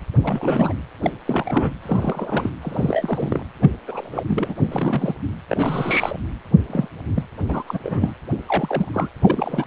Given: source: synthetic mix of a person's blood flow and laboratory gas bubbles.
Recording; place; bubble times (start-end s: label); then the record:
Doppler ultrasound of blood flow; precordium
0.22-0.73 s: bubbles
1.02-1.11 s: bubbles
1.25-1.71 s: bubbles
1.82-2.50 s: bubbles
2.62-3.41 s: bubbles
3.62-3.69 s: bubbles
3.87-4.23 s: bubbles
4.28-4.53 s: bubbles
4.68-5.13 s: bubbles
5.50-6.19 s: bubbles
6.69-6.88 s: bubbles
7.14-7.24 s: bubbles
7.48-7.63 s: bubbles
7.67-7.79 s: bubbles
7.83-8.13 s: bubbles
8.47-8.90 s: bubbles
8.94-9.08 s: bubbles
9.21-9.67 s: bubbles
From the record:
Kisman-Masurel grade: 242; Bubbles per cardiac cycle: several, 3 to 8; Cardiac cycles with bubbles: 100%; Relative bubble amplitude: moderate (0.250 to 0.450); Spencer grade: 3 (all of the cardiac periods contain showers or single bubble signals, but not dominating or overriding the cardiac motion signals); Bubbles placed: anywhere in the cardiac cycle